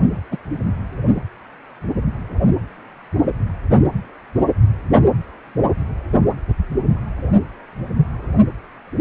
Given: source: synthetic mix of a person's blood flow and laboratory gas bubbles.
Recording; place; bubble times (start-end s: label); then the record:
Doppler ultrasound of blood flow; precordium
0.31-0.37 s: bubbles
From the record:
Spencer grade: 1 (occasional bubble signal discernible with the cardiac motion signal, with majority of cardiac periods free of bubbles); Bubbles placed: only in the low amplitude regions of the cardiac cycle